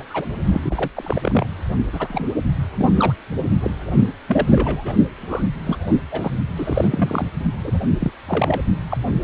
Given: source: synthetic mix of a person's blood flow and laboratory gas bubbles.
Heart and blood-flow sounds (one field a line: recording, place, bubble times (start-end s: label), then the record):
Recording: Doppler ultrasound of blood flow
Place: precordium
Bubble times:
0.00-0.03 s: bubbles
0.10-0.25 s: bubbles
0.44-0.91 s: bubbles
0.95-1.47 s: bubbles
1.92-2.29 s: bubbles
2.75-2.89 s: bubbles
2.96-3.15 s: bubbles
3.60-3.71 s: bubbles
3.91-4.04 s: bubbles
4.28-4.93 s: bubbles
5.17-5.45 s: bubbles
5.58-5.77 s: bubbles
5.86-5.95 s: bubbles
6.12-6.32 s: bubbles
6.55-7.26 s: bubbles
7.63-7.79 s: bubbles
7.99-8.12 s: bubbles
8.28-8.61 s: bubbles
8.90-8.97 s: bubbles
From the record:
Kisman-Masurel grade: 242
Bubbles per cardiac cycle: several, 3 to 8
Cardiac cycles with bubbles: 100%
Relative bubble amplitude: moderate (0.250 to 0.450)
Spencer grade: 3 (all of the cardiac periods contain showers or single bubble signals, but not dominating or overriding the cardiac motion signals)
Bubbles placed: only in the low amplitude regions of the cardiac cycle